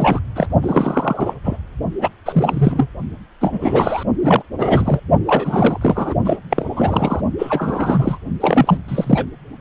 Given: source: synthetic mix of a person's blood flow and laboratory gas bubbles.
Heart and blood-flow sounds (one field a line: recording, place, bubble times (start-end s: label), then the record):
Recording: Doppler ultrasound of blood flow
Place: precordium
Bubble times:
0.00-0.20 s: bubbles
0.35-0.47 s: bubbles
0.62-1.34 s: bubbles
1.44-1.57 s: bubbles
2.01-2.10 s: bubbles
2.25-2.87 s: bubbles
3.41-4.04 s: bubbles
4.21-4.42 s: bubbles
4.58-5.00 s: bubbles
5.25-5.78 s: bubbles
5.81-6.14 s: bubbles
6.25-6.36 s: bubbles
6.50-7.21 s: bubbles
7.38-8.18 s: bubbles
8.40-8.78 s: bubbles
8.88-9.26 s: bubbles
From the record:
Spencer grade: 3 (all of the cardiac periods contain showers or single bubble signals, but not dominating or overriding the cardiac motion signals)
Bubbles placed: only in the low amplitude regions of the cardiac cycle